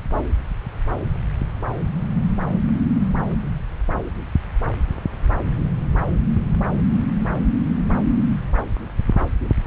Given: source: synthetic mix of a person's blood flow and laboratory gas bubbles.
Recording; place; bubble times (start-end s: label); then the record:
Doppler ultrasound of blood flow; subclavian vein
no bubbles
From the record:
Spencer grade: 0 (complete lack of bubble signals)